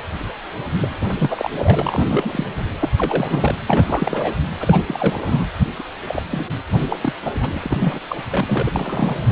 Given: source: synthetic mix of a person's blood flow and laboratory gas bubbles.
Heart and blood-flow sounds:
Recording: Doppler ultrasound of blood flow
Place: precordium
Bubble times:
0.78-0.96 s: bubbles
1.19-1.48 s: bubbles
1.58-2.08 s: bubbles
2.10-2.50 s: bubbles
2.80-2.90 s: bubbles
2.97-3.55 s: bubbles
3.66-4.34 s: bubbles
4.60-4.83 s: bubbles
4.88-5.45 s: bubbles
5.79-5.83 s: bubbles
6.07-6.23 s: bubbles
6.30-6.53 s: bubbles
6.67-6.80 s: bubbles
6.88-6.96 s: bubbles
7.01-7.13 s: bubbles
7.25-8.00 s: bubbles
8.08-8.22 s: bubbles
8.31-8.72 s: bubbles
8.75-9.32 s: bubbles
From the record:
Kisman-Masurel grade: 342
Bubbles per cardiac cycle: rolling drumbeat, 9 or more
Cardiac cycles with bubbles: 100%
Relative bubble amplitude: moderate (0.250 to 0.450)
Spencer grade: 3 (all of the cardiac periods contain showers or single bubble signals, but not dominating or overriding the cardiac motion signals)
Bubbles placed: anywhere in the cardiac cycle

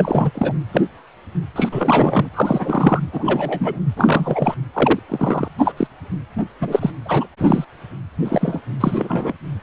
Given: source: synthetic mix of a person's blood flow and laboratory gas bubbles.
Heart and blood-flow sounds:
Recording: Doppler ultrasound of blood flow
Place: precordium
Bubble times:
0.00-0.30 s: bubbles
0.34-0.54 s: bubbles
0.72-0.88 s: bubbles
1.56-1.69 s: bubbles
1.71-2.29 s: bubbles
2.33-3.00 s: bubbles
3.12-3.79 s: bubbles
3.96-4.54 s: bubbles
4.73-5.00 s: bubbles
5.08-5.48 s: bubbles
5.58-5.72 s: bubbles
5.77-5.88 s: bubbles
6.60-6.91 s: bubbles
7.05-7.26 s: bubbles
7.38-7.65 s: bubbles
8.25-8.61 s: bubbles
8.80-9.33 s: bubbles
From the record:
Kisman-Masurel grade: 243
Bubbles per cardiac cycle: several, 3 to 8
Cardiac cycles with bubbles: 100%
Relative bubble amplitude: loud (0.450 to 0.775)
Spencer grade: 3 (all of the cardiac periods contain showers or single bubble signals, but not dominating or overriding the cardiac motion signals)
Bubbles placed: anywhere in the cardiac cycle

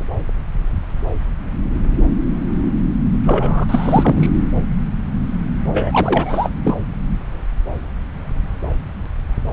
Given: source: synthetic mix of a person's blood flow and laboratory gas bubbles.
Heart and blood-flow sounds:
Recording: Doppler ultrasound of blood flow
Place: subclavian vein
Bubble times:
3.23-3.66 s: bubbles
3.69-4.29 s: bubbles
5.70-6.50 s: bubbles
6.63-6.76 s: bubbles
From the record:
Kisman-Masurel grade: 223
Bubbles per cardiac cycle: several, 3 to 8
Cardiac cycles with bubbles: 10 to 50%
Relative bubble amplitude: loud (0.450 to 0.775)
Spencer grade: 2 (many but less than half of the cardiac periods contain bubble signals, singularly or in groups)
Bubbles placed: anywhere in the cardiac cycle

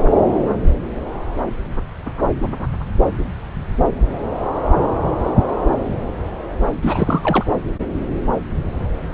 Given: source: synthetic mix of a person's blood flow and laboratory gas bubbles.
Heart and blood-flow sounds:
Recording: Doppler ultrasound of blood flow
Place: subclavian vein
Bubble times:
6.82-7.45 s: bubbles
From the record:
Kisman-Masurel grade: 212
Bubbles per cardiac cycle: several, 3 to 8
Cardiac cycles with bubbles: 1 to 10%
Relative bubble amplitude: moderate (0.250 to 0.450)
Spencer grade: 1 (occasional bubble signal discernible with the cardiac motion signal, with majority of cardiac periods free of bubbles)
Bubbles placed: anywhere in the cardiac cycle

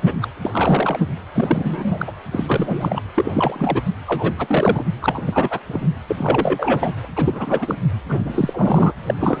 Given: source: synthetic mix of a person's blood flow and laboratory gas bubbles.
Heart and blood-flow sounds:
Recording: Doppler ultrasound of blood flow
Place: precordium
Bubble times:
0.05-0.14 s: bubbles
0.21-0.28 s: bubbles
0.43-0.99 s: bubbles
1.34-2.12 s: bubbles
2.31-3.02 s: bubbles
3.14-3.82 s: bubbles
4.07-4.33 s: bubbles
4.38-4.84 s: bubbles
5.01-5.22 s: bubbles
5.25-5.59 s: bubbles
5.67-5.88 s: bubbles
6.08-6.92 s: bubbles
7.03-7.05 s: bubbles
7.16-7.75 s: bubbles
8.08-8.19 s: bubbles
8.25-8.94 s: bubbles
9.06-9.40 s: bubbles
From the record:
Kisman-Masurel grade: 343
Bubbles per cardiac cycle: rolling drumbeat, 9 or more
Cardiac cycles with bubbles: 100%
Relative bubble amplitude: loud (0.450 to 0.775)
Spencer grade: 3 (all of the cardiac periods contain showers or single bubble signals, but not dominating or overriding the cardiac motion signals)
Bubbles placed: anywhere in the cardiac cycle

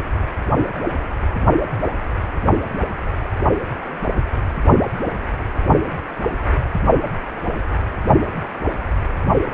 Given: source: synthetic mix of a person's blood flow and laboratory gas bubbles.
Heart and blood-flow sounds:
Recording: Doppler ultrasound of blood flow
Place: precordium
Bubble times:
no bubbles
From the record:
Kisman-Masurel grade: 000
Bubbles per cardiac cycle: 0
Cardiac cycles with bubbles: 0%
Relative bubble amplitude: no bubbles discernible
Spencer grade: 0 (complete lack of bubble signals)

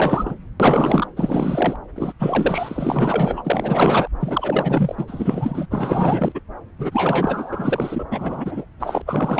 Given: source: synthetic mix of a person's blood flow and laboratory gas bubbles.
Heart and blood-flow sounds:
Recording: Doppler ultrasound of blood flow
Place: subclavian vein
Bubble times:
0.00-0.35 s: bubbles
0.59-1.07 s: bubbles
1.16-1.76 s: bubbles
1.96-2.13 s: bubbles
2.19-4.07 s: bubbles
4.20-5.67 s: bubbles
5.70-6.40 s: bubbles
6.78-8.04 s: bubbles
8.11-8.65 s: bubbles
8.79-9.01 s: bubbles
9.05-9.40 s: bubbles
From the record:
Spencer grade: 4 (maximum detectable bubble signal sounding continuously throughout systole and diastole of every cardiac period, and overriding the amplitude of the normal cardiac signals)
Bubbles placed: anywhere in the cardiac cycle

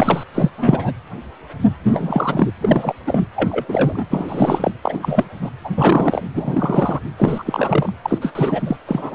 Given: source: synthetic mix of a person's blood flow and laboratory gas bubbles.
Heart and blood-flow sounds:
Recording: Doppler ultrasound of blood flow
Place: precordium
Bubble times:
0.00-0.23 s: bubbles
0.34-0.51 s: bubbles
0.57-0.92 s: bubbles
1.83-2.51 s: bubbles
2.60-2.94 s: bubbles
3.06-3.23 s: bubbles
3.35-3.65 s: bubbles
3.68-4.07 s: bubbles
4.10-4.71 s: bubbles
4.83-5.24 s: bubbles
5.41-5.50 s: bubbles
5.64-5.70 s: bubbles
5.77-6.23 s: bubbles
6.34-6.99 s: bubbles
7.17-7.92 s: bubbles
8.03-8.18 s: bubbles
8.21-8.32 s: bubbles
8.35-8.76 s: bubbles
8.87-9.14 s: bubbles
From the record:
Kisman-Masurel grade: 333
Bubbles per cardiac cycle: rolling drumbeat, 9 or more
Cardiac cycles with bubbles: 50 to 99%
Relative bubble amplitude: loud (0.450 to 0.775)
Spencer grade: 3 (all of the cardiac periods contain showers or single bubble signals, but not dominating or overriding the cardiac motion signals)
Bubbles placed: anywhere in the cardiac cycle

